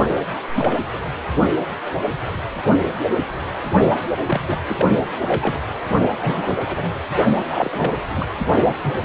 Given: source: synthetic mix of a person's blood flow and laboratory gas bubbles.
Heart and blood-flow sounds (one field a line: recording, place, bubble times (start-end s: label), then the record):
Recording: Doppler ultrasound of blood flow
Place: precordium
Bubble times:
0.55-0.78 s: bubbles
0.93-0.98 s: bubbles
4.26-4.41 s: bubbles
4.48-4.58 s: bubbles
4.68-4.86 s: bubbles
5.21-5.60 s: bubbles
6.21-6.90 s: bubbles
7.46-7.94 s: bubbles
8.16-8.28 s: bubbles
8.83-8.97 s: bubbles
From the record:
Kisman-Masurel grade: 222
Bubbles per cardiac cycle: several, 3 to 8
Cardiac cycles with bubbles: 10 to 50%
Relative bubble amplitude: moderate (0.250 to 0.450)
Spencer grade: 2 (many but less than half of the cardiac periods contain bubble signals, singularly or in groups)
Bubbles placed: only in the low amplitude regions of the cardiac cycle